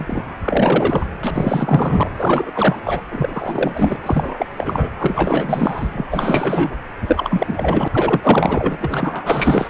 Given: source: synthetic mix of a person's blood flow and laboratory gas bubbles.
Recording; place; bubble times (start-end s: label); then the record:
Doppler ultrasound of blood flow; precordium
0.00-0.25 s: bubbles
0.43-1.05 s: bubbles
1.22-2.09 s: bubbles
2.16-2.51 s: bubbles
2.55-2.76 s: bubbles
2.84-3.02 s: bubbles
3.10-3.98 s: bubbles
4.03-4.46 s: bubbles
4.58-4.89 s: bubbles
4.98-5.88 s: bubbles
5.92-6.06 s: bubbles
6.11-6.75 s: bubbles
7.01-7.88 s: bubbles
7.93-9.69 s: bubbles
From the record:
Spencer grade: 4 (maximum detectable bubble signal sounding continuously throughout systole and diastole of every cardiac period, and overriding the amplitude of the normal cardiac signals); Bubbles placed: anywhere in the cardiac cycle